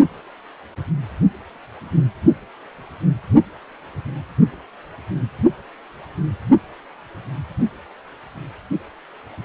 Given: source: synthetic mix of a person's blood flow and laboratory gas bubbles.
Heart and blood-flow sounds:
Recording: Doppler ultrasound of blood flow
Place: precordium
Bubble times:
no bubbles
From the record:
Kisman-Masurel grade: 000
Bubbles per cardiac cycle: 0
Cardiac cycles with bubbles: 0%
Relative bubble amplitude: no bubbles discernible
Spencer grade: 0 (complete lack of bubble signals)

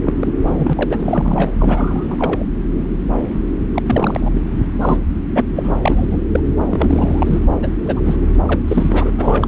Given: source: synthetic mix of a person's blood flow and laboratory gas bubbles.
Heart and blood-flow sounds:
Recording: Doppler ultrasound of blood flow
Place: subclavian vein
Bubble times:
0.06-0.13 s: bubbles
0.19-0.32 s: bubbles
0.47-0.55 s: bubbles
0.59-1.50 s: bubbles
1.59-2.44 s: bubbles
3.75-3.82 s: bubbles
3.86-4.42 s: bubbles
4.80-4.97 s: bubbles
5.34-5.50 s: bubbles
5.55-5.79 s: bubbles
5.82-6.07 s: bubbles
6.11-6.18 s: bubbles
6.32-6.40 s: bubbles
6.44-6.54 s: bubbles
6.70-7.41 s: bubbles
7.62-7.67 s: bubbles
7.85-8.17 s: bubbles
8.46-8.60 s: bubbles
8.68-9.11 s: bubbles
9.18-9.47 s: bubbles
From the record:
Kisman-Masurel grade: 233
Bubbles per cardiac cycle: several, 3 to 8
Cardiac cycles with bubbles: 50 to 99%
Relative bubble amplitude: loud (0.450 to 0.775)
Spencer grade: 3 (all of the cardiac periods contain showers or single bubble signals, but not dominating or overriding the cardiac motion signals)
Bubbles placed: anywhere in the cardiac cycle

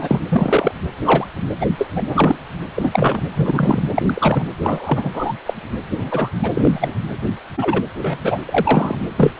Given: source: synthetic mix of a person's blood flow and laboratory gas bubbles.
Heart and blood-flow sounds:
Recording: Doppler ultrasound of blood flow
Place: precordium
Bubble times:
0.00-0.20 s: bubbles
0.29-0.72 s: bubbles
1.03-1.27 s: bubbles
1.60-1.67 s: bubbles
1.78-1.89 s: bubbles
1.95-2.05 s: bubbles
2.08-2.38 s: bubbles
2.75-3.22 s: bubbles
3.36-3.79 s: bubbles
3.94-4.02 s: bubbles
4.05-4.46 s: bubbles
4.63-5.09 s: bubbles
5.13-5.33 s: bubbles
5.46-5.54 s: bubbles
5.98-6.29 s: bubbles
6.42-6.49 s: bubbles
6.54-6.95 s: bubbles
7.57-7.82 s: bubbles
7.95-8.20 s: bubbles
8.22-8.38 s: bubbles
8.46-8.95 s: bubbles
9.17-9.32 s: bubbles
From the record:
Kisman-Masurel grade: 243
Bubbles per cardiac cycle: several, 3 to 8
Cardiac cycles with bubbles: 100%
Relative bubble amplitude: loud (0.450 to 0.775)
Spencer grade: 3 (all of the cardiac periods contain showers or single bubble signals, but not dominating or overriding the cardiac motion signals)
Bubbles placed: anywhere in the cardiac cycle

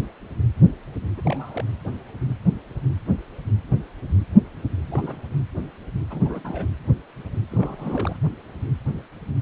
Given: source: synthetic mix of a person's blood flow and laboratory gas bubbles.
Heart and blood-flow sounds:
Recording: Doppler ultrasound of blood flow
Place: precordium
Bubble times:
1.17-1.64 s: bubbles
4.88-5.16 s: bubbles
6.10-6.67 s: bubbles
7.51-8.17 s: bubbles
From the record:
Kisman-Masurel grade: 221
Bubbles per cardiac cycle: several, 3 to 8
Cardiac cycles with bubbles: 10 to 50%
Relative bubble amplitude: barely perceptible (0.100 to 0.250)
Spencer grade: 2 (many but less than half of the cardiac periods contain bubble signals, singularly or in groups)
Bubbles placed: anywhere in the cardiac cycle

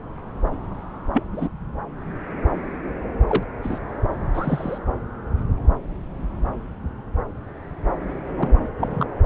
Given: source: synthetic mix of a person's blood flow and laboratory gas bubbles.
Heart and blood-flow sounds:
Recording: Doppler ultrasound of blood flow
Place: subclavian vein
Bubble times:
1.12-1.23 s: bubbles
1.33-1.48 s: bubbles
3.27-3.44 s: bubbles
3.62-3.79 s: bubbles
4.33-4.78 s: bubbles
8.38-8.51 s: bubbles
8.79-9.05 s: bubbles
From the record:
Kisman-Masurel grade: 123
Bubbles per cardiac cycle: 1 to 2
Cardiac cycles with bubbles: 10 to 50%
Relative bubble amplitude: loud (0.450 to 0.775)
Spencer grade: 2 (many but less than half of the cardiac periods contain bubble signals, singularly or in groups)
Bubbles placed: anywhere in the cardiac cycle

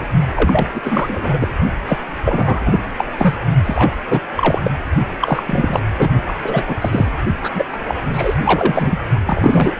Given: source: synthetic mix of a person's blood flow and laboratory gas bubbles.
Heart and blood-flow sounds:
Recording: Doppler ultrasound of blood flow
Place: precordium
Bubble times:
0.35-0.67 s: bubbles
0.74-0.81 s: bubbles
0.83-1.48 s: bubbles
1.86-1.98 s: bubbles
2.24-2.79 s: bubbles
2.98-3.06 s: bubbles
3.17-3.35 s: bubbles
3.64-3.96 s: bubbles
4.10-4.20 s: bubbles
4.36-4.61 s: bubbles
4.64-4.70 s: bubbles
5.20-5.43 s: bubbles
5.46-5.81 s: bubbles
5.98-6.09 s: bubbles
6.27-6.33 s: bubbles
6.42-6.63 s: bubbles
6.67-6.75 s: bubbles
6.80-7.10 s: bubbles
7.42-7.50 s: bubbles
7.54-7.63 s: bubbles
7.72-7.77 s: bubbles
7.87-7.94 s: bubbles
8.12-8.36 s: bubbles
8.44-8.99 s: bubbles
9.25-9.76 s: bubbles
From the record:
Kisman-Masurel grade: 343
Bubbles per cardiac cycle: rolling drumbeat, 9 or more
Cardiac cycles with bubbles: 100%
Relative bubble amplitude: loud (0.450 to 0.775)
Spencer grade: 3 (all of the cardiac periods contain showers or single bubble signals, but not dominating or overriding the cardiac motion signals)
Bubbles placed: only in the low amplitude regions of the cardiac cycle

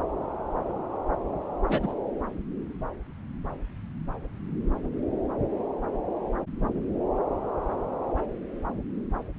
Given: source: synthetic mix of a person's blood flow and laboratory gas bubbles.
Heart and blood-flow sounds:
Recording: Doppler ultrasound of blood flow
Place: subclavian vein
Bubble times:
1.69-1.95 s: bubbles
From the record:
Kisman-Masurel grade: 111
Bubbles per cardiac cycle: 1 to 2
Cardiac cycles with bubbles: 1 to 10%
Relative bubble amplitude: barely perceptible (0.100 to 0.250)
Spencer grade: 1 (occasional bubble signal discernible with the cardiac motion signal, with majority of cardiac periods free of bubbles)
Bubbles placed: anywhere in the cardiac cycle

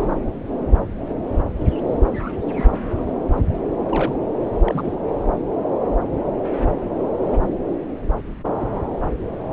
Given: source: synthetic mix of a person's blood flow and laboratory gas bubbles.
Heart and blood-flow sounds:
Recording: Doppler ultrasound of blood flow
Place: subclavian vein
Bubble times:
2.56-3.03 s: bubbles
3.89-4.17 s: bubbles
4.65-4.95 s: bubbles
From the record:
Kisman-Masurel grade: 121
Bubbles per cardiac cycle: 1 to 2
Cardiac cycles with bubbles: 10 to 50%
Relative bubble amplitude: barely perceptible (0.100 to 0.250)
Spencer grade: 2 (many but less than half of the cardiac periods contain bubble signals, singularly or in groups)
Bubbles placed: anywhere in the cardiac cycle

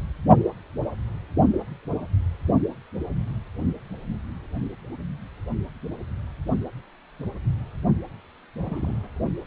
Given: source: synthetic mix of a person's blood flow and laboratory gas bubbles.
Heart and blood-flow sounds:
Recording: Doppler ultrasound of blood flow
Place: precordium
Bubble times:
8.60-8.97 s: bubbles
From the record:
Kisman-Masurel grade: 111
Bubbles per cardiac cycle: 1 to 2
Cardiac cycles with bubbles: 1 to 10%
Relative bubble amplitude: barely perceptible (0.100 to 0.250)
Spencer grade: 1 (occasional bubble signal discernible with the cardiac motion signal, with majority of cardiac periods free of bubbles)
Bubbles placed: only in the low amplitude regions of the cardiac cycle

